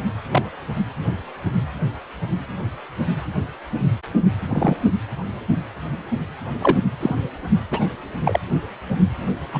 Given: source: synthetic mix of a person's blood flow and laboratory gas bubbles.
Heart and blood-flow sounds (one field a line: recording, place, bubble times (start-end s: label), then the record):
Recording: Doppler ultrasound of blood flow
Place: precordium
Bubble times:
0.31-0.42 s: bubbles
4.50-4.76 s: bubbles
6.61-6.78 s: bubbles
7.00-7.16 s: bubbles
7.71-7.87 s: bubbles
8.23-8.39 s: bubbles
9.52-9.60 s: bubbles
From the record:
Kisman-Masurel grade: 123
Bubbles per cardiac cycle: 1 to 2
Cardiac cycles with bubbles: 10 to 50%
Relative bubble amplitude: loud (0.450 to 0.775)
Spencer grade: 2 (many but less than half of the cardiac periods contain bubble signals, singularly or in groups)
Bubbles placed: anywhere in the cardiac cycle